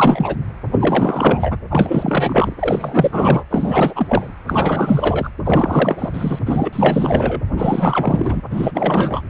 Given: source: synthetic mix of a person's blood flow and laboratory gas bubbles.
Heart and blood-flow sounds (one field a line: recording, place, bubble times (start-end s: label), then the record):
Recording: Doppler ultrasound of blood flow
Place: precordium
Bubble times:
0.00-0.36 s: bubbles
0.71-1.58 s: bubbles
1.70-2.52 s: bubbles
2.59-3.44 s: bubbles
3.50-4.30 s: bubbles
4.47-5.30 s: bubbles
5.44-6.09 s: bubbles
6.14-6.39 s: bubbles
6.46-7.41 s: bubbles
7.57-8.41 s: bubbles
8.51-9.21 s: bubbles
From the record:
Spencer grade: 4 (maximum detectable bubble signal sounding continuously throughout systole and diastole of every cardiac period, and overriding the amplitude of the normal cardiac signals)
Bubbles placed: anywhere in the cardiac cycle